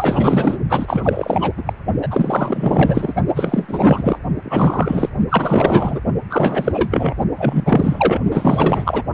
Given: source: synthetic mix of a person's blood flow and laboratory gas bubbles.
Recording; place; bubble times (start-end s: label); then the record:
Doppler ultrasound of blood flow; precordium
0.00-0.58 s: bubbles
0.69-1.53 s: bubbles
1.57-1.63 s: bubbles
1.65-1.73 s: bubbles
2.02-2.08 s: bubbles
2.10-3.13 s: bubbles
3.34-4.19 s: bubbles
4.43-5.09 s: bubbles
5.29-6.01 s: bubbles
6.29-7.15 s: bubbles
7.37-8.21 s: bubbles
8.30-9.03 s: bubbles
From the record:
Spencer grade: 4 (maximum detectable bubble signal sounding continuously throughout systole and diastole of every cardiac period, and overriding the amplitude of the normal cardiac signals); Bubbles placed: only in the low amplitude regions of the cardiac cycle